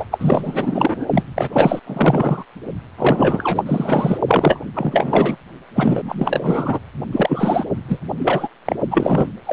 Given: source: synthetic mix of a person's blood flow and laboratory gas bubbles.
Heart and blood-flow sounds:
Doppler ultrasound of blood flow; precordium
0.00-0.05 s: bubbles
0.10-1.06 s: bubbles
1.10-1.23 s: bubbles
1.35-1.50 s: bubbles
1.52-1.80 s: bubbles
1.86-2.44 s: bubbles
2.97-3.63 s: bubbles
3.66-4.17 s: bubbles
4.27-4.60 s: bubbles
4.74-5.36 s: bubbles
5.74-6.79 s: bubbles
7.12-7.64 s: bubbles
7.88-8.00 s: bubbles
8.18-8.48 s: bubbles
8.65-8.76 s: bubbles
8.90-9.29 s: bubbles
9.46-9.53 s: bubbles
From the record:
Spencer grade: 4 (maximum detectable bubble signal sounding continuously throughout systole and diastole of every cardiac period, and overriding the amplitude of the normal cardiac signals); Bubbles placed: only in the low amplitude regions of the cardiac cycle

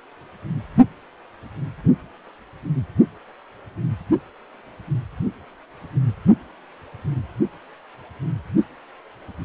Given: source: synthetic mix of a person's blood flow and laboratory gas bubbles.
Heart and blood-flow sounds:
Doppler ultrasound of blood flow; precordium
no bubbles
From the record:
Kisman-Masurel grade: 000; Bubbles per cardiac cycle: 0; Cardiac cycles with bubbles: 0%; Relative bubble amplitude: no bubbles discernible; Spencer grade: 0 (complete lack of bubble signals)

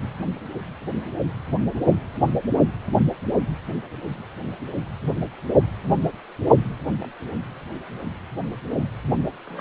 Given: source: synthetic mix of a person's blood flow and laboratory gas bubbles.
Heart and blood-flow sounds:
Doppler ultrasound of blood flow; precordium
6.60-6.64 s: bubbles
7.00-7.11 s: bubbles
9.46-9.61 s: bubbles
From the record:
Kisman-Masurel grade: 121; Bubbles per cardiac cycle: 1 to 2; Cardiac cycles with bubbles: 10 to 50%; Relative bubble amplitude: barely perceptible (0.100 to 0.250); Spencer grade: 2 (many but less than half of the cardiac periods contain bubble signals, singularly or in groups); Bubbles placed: only in the low amplitude regions of the cardiac cycle

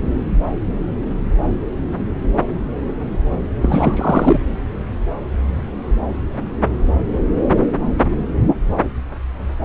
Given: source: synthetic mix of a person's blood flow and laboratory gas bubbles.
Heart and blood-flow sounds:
Doppler ultrasound of blood flow; subclavian vein
3.61-4.39 s: bubbles
From the record:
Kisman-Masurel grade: 213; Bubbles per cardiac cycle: several, 3 to 8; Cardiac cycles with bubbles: 1 to 10%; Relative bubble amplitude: loud (0.450 to 0.775); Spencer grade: 1 (occasional bubble signal discernible with the cardiac motion signal, with majority of cardiac periods free of bubbles); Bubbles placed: anywhere in the cardiac cycle

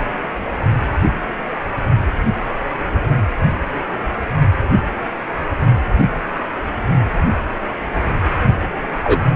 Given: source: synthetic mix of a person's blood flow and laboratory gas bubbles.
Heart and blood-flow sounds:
Doppler ultrasound of blood flow; precordium
9.03-9.22 s: bubbles
From the record:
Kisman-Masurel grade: 113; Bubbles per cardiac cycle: 1 to 2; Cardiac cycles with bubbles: 1 to 10%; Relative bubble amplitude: loud (0.450 to 0.775); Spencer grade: 1 (occasional bubble signal discernible with the cardiac motion signal, with majority of cardiac periods free of bubbles); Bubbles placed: only in the low amplitude regions of the cardiac cycle

